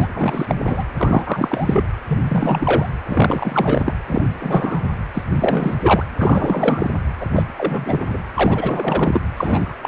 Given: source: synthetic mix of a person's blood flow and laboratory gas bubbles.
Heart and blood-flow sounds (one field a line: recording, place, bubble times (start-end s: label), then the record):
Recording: Doppler ultrasound of blood flow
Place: precordium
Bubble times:
0.00-0.07 s: bubbles
0.13-0.46 s: bubbles
0.48-0.55 s: bubbles
0.67-0.84 s: bubbles
0.97-1.84 s: bubbles
2.07-2.89 s: bubbles
3.09-3.94 s: bubbles
4.06-4.28 s: bubbles
4.39-4.82 s: bubbles
5.13-5.22 s: bubbles
5.35-5.75 s: bubbles
5.81-6.05 s: bubbles
6.18-6.89 s: bubbles
7.20-7.26 s: bubbles
7.35-7.42 s: bubbles
7.57-8.19 s: bubbles
8.34-9.21 s: bubbles
9.37-9.74 s: bubbles
9.82-9.88 s: bubbles
From the record:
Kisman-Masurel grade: 343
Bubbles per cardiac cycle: rolling drumbeat, 9 or more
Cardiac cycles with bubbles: 100%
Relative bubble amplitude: loud (0.450 to 0.775)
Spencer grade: 3 (all of the cardiac periods contain showers or single bubble signals, but not dominating or overriding the cardiac motion signals)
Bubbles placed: anywhere in the cardiac cycle